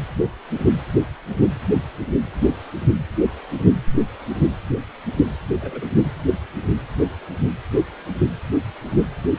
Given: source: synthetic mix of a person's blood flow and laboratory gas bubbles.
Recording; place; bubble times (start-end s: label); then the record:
Doppler ultrasound of blood flow; precordium
5.61-5.86 s: bubbles
6.03-6.10 s: bubbles
From the record:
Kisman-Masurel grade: 211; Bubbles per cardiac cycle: several, 3 to 8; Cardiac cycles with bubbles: 1 to 10%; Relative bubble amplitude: barely perceptible (0.100 to 0.250); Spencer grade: 1 (occasional bubble signal discernible with the cardiac motion signal, with majority of cardiac periods free of bubbles); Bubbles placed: anywhere in the cardiac cycle